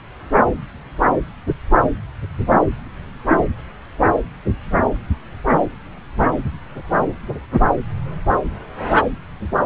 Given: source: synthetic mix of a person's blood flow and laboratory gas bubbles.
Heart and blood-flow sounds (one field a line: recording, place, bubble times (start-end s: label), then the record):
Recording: Doppler ultrasound of blood flow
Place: subclavian vein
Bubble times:
no bubbles
From the record:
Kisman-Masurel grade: 000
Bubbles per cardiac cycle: 0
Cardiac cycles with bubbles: 0%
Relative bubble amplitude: no bubbles discernible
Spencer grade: 0 (complete lack of bubble signals)